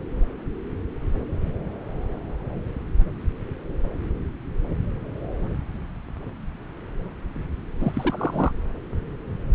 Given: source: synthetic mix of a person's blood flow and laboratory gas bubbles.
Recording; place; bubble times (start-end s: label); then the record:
Doppler ultrasound of blood flow; subclavian vein
7.80-8.52 s: bubbles
From the record:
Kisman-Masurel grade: 211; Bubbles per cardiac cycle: several, 3 to 8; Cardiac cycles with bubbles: 1 to 10%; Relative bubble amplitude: barely perceptible (0.100 to 0.250); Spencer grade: 1 (occasional bubble signal discernible with the cardiac motion signal, with majority of cardiac periods free of bubbles); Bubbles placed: anywhere in the cardiac cycle